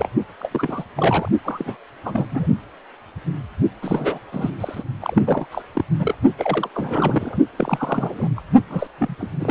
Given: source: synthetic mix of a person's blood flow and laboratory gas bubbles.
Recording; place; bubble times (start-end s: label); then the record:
Doppler ultrasound of blood flow; precordium
0.00-0.08 s: bubbles
0.40-0.49 s: bubbles
0.51-0.84 s: bubbles
0.97-1.29 s: bubbles
1.45-1.76 s: bubbles
2.05-2.26 s: bubbles
2.31-2.47 s: bubbles
3.82-4.18 s: bubbles
4.32-4.50 s: bubbles
4.60-4.83 s: bubbles
5.01-5.21 s: bubbles
5.25-5.47 s: bubbles
5.51-5.62 s: bubbles
5.73-5.84 s: bubbles
5.99-6.14 s: bubbles
6.37-6.69 s: bubbles
6.74-7.38 s: bubbles
7.57-8.31 s: bubbles
8.37-8.40 s: bubbles
8.70-8.87 s: bubbles
8.98-9.15 s: bubbles
9.19-9.31 s: bubbles
9.40-9.51 s: bubbles
From the record:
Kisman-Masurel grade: 332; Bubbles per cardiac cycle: rolling drumbeat, 9 or more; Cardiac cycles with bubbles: 50 to 99%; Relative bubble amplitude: moderate (0.250 to 0.450); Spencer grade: 3 (all of the cardiac periods contain showers or single bubble signals, but not dominating or overriding the cardiac motion signals); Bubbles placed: only in the low amplitude regions of the cardiac cycle